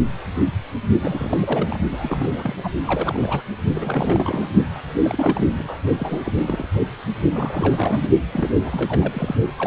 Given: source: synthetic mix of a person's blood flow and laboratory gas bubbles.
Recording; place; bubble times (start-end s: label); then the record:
Doppler ultrasound of blood flow; precordium
0.99-1.38 s: bubbles
1.40-1.79 s: bubbles
1.92-2.69 s: bubbles
2.85-3.44 s: bubbles
3.73-4.50 s: bubbles
4.75-4.79 s: bubbles
5.01-5.83 s: bubbles
5.97-6.32 s: bubbles
6.36-6.67 s: bubbles
7.33-8.10 s: bubbles
8.32-8.49 s: bubbles
8.61-9.36 s: bubbles
9.58-9.67 s: bubbles
From the record:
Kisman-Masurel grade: 332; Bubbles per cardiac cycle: rolling drumbeat, 9 or more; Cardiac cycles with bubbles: 50 to 99%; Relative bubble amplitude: moderate (0.250 to 0.450); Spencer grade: 3 (all of the cardiac periods contain showers or single bubble signals, but not dominating or overriding the cardiac motion signals); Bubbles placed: only in the low amplitude regions of the cardiac cycle